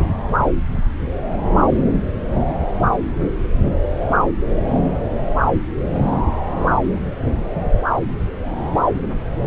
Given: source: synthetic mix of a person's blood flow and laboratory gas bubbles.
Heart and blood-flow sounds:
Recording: Doppler ultrasound of blood flow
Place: subclavian vein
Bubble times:
no bubbles
From the record:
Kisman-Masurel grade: 000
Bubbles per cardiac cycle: 0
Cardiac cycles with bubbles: 0%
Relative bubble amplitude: no bubbles discernible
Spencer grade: 0 (complete lack of bubble signals)

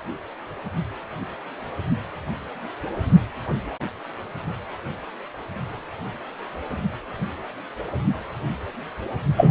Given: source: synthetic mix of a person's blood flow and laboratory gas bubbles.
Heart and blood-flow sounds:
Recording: Doppler ultrasound of blood flow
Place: precordium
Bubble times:
9.36-9.51 s: bubbles
From the record:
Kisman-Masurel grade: 113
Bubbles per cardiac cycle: 1 to 2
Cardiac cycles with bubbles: 1 to 10%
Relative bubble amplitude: loud (0.450 to 0.775)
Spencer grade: 1 (occasional bubble signal discernible with the cardiac motion signal, with majority of cardiac periods free of bubbles)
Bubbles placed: anywhere in the cardiac cycle

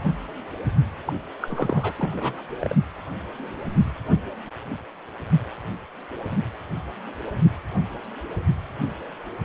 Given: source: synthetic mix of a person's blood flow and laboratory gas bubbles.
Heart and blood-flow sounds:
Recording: Doppler ultrasound of blood flow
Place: precordium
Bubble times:
1.05-1.13 s: bubbles
1.42-1.94 s: bubbles
1.98-2.42 s: bubbles
2.61-2.75 s: bubbles
From the record:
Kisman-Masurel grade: 211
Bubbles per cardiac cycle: several, 3 to 8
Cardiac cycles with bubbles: 1 to 10%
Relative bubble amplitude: barely perceptible (0.100 to 0.250)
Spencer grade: 1 (occasional bubble signal discernible with the cardiac motion signal, with majority of cardiac periods free of bubbles)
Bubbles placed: only in the low amplitude regions of the cardiac cycle

